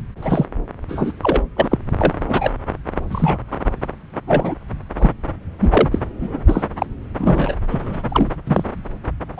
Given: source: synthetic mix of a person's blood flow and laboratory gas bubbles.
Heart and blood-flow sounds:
Doppler ultrasound of blood flow; subclavian vein
0.21-0.45 s: bubbles
0.88-1.12 s: bubbles
1.22-1.41 s: bubbles
1.56-1.79 s: bubbles
1.99-2.13 s: bubbles
2.28-2.50 s: bubbles
3.11-3.38 s: bubbles
3.51-3.55 s: bubbles
4.27-4.54 s: bubbles
4.98-5.13 s: bubbles
5.60-5.89 s: bubbles
5.92-5.99 s: bubbles
6.20-6.62 s: bubbles
6.78-6.86 s: bubbles
7.18-7.55 s: bubbles
7.70-8.03 s: bubbles
8.09-8.29 s: bubbles
8.47-8.64 s: bubbles
9.37-9.40 s: bubbles
From the record:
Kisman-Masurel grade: 233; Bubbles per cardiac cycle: several, 3 to 8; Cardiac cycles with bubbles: 50 to 99%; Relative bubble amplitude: loud (0.450 to 0.775); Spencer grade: 3 (all of the cardiac periods contain showers or single bubble signals, but not dominating or overriding the cardiac motion signals); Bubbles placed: anywhere in the cardiac cycle

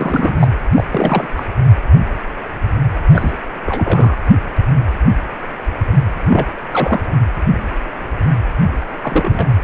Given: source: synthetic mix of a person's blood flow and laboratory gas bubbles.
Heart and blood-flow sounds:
Doppler ultrasound of blood flow; precordium
0.00-0.48 s: bubbles
0.75-0.84 s: bubbles
0.92-1.26 s: bubbles
1.36-1.45 s: bubbles
3.11-3.38 s: bubbles
3.67-4.16 s: bubbles
6.28-6.47 s: bubbles
6.71-7.06 s: bubbles
9.02-9.48 s: bubbles
From the record:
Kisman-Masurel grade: 332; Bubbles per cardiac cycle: rolling drumbeat, 9 or more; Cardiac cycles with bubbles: 50 to 99%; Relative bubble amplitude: moderate (0.250 to 0.450); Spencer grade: 3 (all of the cardiac periods contain showers or single bubble signals, but not dominating or overriding the cardiac motion signals); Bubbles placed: anywhere in the cardiac cycle

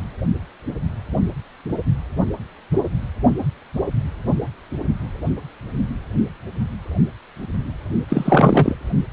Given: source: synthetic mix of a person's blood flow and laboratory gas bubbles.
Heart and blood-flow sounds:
Doppler ultrasound of blood flow; precordium
8.09-8.75 s: bubbles
From the record:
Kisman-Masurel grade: 213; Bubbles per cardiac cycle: several, 3 to 8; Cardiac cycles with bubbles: 1 to 10%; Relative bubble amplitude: loud (0.450 to 0.775); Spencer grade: 1 (occasional bubble signal discernible with the cardiac motion signal, with majority of cardiac periods free of bubbles); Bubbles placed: only in the low amplitude regions of the cardiac cycle

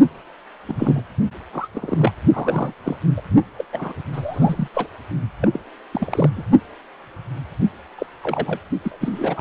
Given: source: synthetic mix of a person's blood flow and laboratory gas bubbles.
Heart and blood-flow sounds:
Doppler ultrasound of blood flow; precordium
0.68-1.02 s: bubbles
1.52-1.68 s: bubbles
1.74-2.12 s: bubbles
2.33-2.73 s: bubbles
2.84-2.97 s: bubbles
3.17-3.21 s: bubbles
3.58-3.64 s: bubbles
3.72-3.93 s: bubbles
4.12-4.68 s: bubbles
4.74-4.88 s: bubbles
5.41-5.49 s: bubbles
5.53-5.59 s: bubbles
5.93-6.29 s: bubbles
6.36-6.42 s: bubbles
7.98-8.06 s: bubbles
8.23-8.60 s: bubbles
8.83-8.97 s: bubbles
9.00-9.41 s: bubbles
From the record:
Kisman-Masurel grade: 232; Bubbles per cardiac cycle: several, 3 to 8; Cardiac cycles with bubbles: 50 to 99%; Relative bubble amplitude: moderate (0.250 to 0.450); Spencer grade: 3 (all of the cardiac periods contain showers or single bubble signals, but not dominating or overriding the cardiac motion signals); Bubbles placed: only in the low amplitude regions of the cardiac cycle

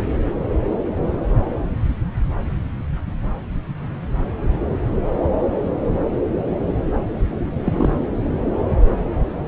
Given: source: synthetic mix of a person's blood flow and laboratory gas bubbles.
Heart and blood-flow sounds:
Doppler ultrasound of blood flow; subclavian vein
7.64-7.91 s: bubbles
From the record:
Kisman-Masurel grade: 123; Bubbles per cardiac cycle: 1 to 2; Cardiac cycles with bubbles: 10 to 50%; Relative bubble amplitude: loud (0.450 to 0.775); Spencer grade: 2 (many but less than half of the cardiac periods contain bubble signals, singularly or in groups); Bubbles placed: anywhere in the cardiac cycle

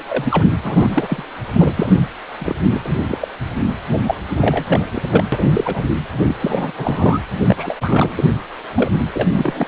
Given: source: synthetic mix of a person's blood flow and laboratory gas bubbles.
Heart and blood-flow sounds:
Doppler ultrasound of blood flow; precordium
0.00-0.03 s: bubbles
0.08-0.44 s: bubbles
0.63-1.23 s: bubbles
1.53-1.73 s: bubbles
1.75-1.97 s: bubbles
2.40-2.54 s: bubbles
2.70-2.80 s: bubbles
2.84-2.99 s: bubbles
3.08-3.18 s: bubbles
3.21-3.28 s: bubbles
4.03-4.14 s: bubbles
4.35-4.87 s: bubbles
4.95-5.02 s: bubbles
5.10-5.24 s: bubbles
5.32-5.82 s: bubbles
6.22-6.35 s: bubbles
6.39-6.71 s: bubbles
6.77-7.19 s: bubbles
7.46-7.75 s: bubbles
7.80-8.25 s: bubbles
8.74-8.92 s: bubbles
9.13-9.29 s: bubbles
9.32-9.67 s: bubbles
From the record:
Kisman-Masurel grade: 342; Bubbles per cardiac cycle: rolling drumbeat, 9 or more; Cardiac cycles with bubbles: 100%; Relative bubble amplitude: moderate (0.250 to 0.450); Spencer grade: 3 (all of the cardiac periods contain showers or single bubble signals, but not dominating or overriding the cardiac motion signals); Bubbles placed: anywhere in the cardiac cycle

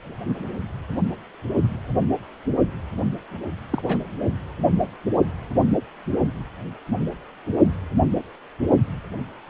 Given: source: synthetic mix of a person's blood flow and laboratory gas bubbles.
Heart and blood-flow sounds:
Doppler ultrasound of blood flow; precordium
3.70-3.82 s: bubbles
3.85-3.98 s: bubbles
From the record:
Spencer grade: 1 (occasional bubble signal discernible with the cardiac motion signal, with majority of cardiac periods free of bubbles); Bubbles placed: anywhere in the cardiac cycle

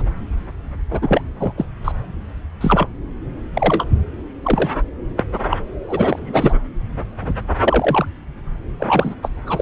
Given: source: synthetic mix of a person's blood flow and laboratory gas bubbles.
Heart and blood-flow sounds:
Doppler ultrasound of blood flow; subclavian vein
0.90-1.21 s: bubbles
1.40-1.53 s: bubbles
1.56-1.65 s: bubbles
1.84-1.92 s: bubbles
2.60-2.87 s: bubbles
3.55-3.87 s: bubbles
4.42-4.71 s: bubbles
5.18-5.24 s: bubbles
5.33-5.39 s: bubbles
5.50-5.58 s: bubbles
5.87-6.54 s: bubbles
7.21-7.33 s: bubbles
7.64-8.06 s: bubbles
8.79-9.15 s: bubbles
9.22-9.29 s: bubbles
9.46-9.62 s: bubbles
From the record:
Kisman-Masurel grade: 243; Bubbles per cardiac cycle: several, 3 to 8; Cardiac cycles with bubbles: 100%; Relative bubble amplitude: loud (0.450 to 0.775); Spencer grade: 3 (all of the cardiac periods contain showers or single bubble signals, but not dominating or overriding the cardiac motion signals); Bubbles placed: anywhere in the cardiac cycle

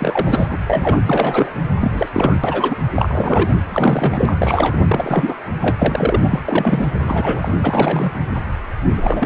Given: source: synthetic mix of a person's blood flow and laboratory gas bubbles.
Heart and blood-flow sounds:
Doppler ultrasound of blood flow; precordium
0.00-0.47 s: bubbles
0.49-0.57 s: bubbles
0.68-1.02 s: bubbles
1.06-1.53 s: bubbles
1.80-2.09 s: bubbles
2.12-2.37 s: bubbles
2.43-2.77 s: bubbles
2.95-3.51 s: bubbles
3.69-4.33 s: bubbles
4.38-4.82 s: bubbles
4.88-5.35 s: bubbles
5.61-6.20 s: bubbles
6.23-6.40 s: bubbles
6.48-6.95 s: bubbles
7.04-7.52 s: bubbles
7.62-8.12 s: bubbles
8.96-9.26 s: bubbles
From the record:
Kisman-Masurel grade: 333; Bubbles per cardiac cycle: rolling drumbeat, 9 or more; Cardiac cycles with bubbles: 50 to 99%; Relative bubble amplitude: loud (0.450 to 0.775); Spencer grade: 3 (all of the cardiac periods contain showers or single bubble signals, but not dominating or overriding the cardiac motion signals); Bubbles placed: anywhere in the cardiac cycle

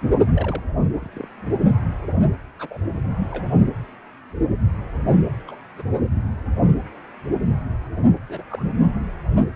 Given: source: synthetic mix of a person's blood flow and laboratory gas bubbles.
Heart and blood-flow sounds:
Doppler ultrasound of blood flow; precordium
0.26-0.62 s: bubbles
1.00-1.28 s: bubbles
2.59-2.79 s: bubbles
3.17-3.46 s: bubbles
5.48-5.56 s: bubbles
5.77-5.82 s: bubbles
8.29-8.43 s: bubbles
8.48-8.65 s: bubbles
From the record:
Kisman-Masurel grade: 121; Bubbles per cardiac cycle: 1 to 2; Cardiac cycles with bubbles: 10 to 50%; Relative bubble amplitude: barely perceptible (0.100 to 0.250); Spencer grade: 2 (many but less than half of the cardiac periods contain bubble signals, singularly or in groups); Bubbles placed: anywhere in the cardiac cycle

